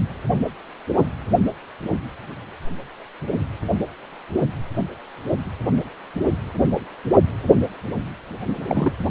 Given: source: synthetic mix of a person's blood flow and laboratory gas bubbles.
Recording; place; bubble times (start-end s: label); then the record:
Doppler ultrasound of blood flow; precordium
8.67-8.92 s: bubbles
From the record:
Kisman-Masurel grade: 211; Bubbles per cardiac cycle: several, 3 to 8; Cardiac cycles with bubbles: 1 to 10%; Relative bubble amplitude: barely perceptible (0.100 to 0.250); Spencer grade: 1 (occasional bubble signal discernible with the cardiac motion signal, with majority of cardiac periods free of bubbles); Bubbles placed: only in the low amplitude regions of the cardiac cycle